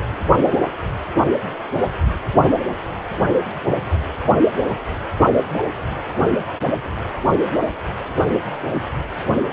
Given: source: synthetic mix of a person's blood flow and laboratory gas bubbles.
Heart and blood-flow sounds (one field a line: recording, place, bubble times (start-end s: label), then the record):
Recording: Doppler ultrasound of blood flow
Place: precordium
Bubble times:
5.53-5.59 s: bubbles
9.49-9.53 s: bubbles
From the record:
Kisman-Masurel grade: 121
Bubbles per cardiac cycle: 1 to 2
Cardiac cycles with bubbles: 10 to 50%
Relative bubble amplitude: barely perceptible (0.100 to 0.250)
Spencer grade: 2 (many but less than half of the cardiac periods contain bubble signals, singularly or in groups)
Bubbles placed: only in the low amplitude regions of the cardiac cycle